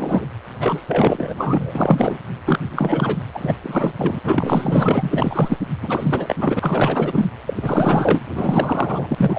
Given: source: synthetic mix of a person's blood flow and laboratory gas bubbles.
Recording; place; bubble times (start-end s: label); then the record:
Doppler ultrasound of blood flow; precordium
0.00-0.27 s: bubbles
0.60-0.85 s: bubbles
0.88-2.18 s: bubbles
2.45-2.59 s: bubbles
2.71-3.18 s: bubbles
3.34-3.56 s: bubbles
3.61-3.93 s: bubbles
3.98-4.21 s: bubbles
4.24-5.58 s: bubbles
5.82-6.36 s: bubbles
6.38-7.28 s: bubbles
7.46-7.54 s: bubbles
7.56-8.24 s: bubbles
8.34-9.39 s: bubbles
From the record:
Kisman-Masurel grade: 444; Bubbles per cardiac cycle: continuous sound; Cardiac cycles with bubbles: 100%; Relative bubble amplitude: maximal (0.775 to 0.999); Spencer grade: 4 (maximum detectable bubble signal sounding continuously throughout systole and diastole of every cardiac period, and overriding the amplitude of the normal cardiac signals); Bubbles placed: anywhere in the cardiac cycle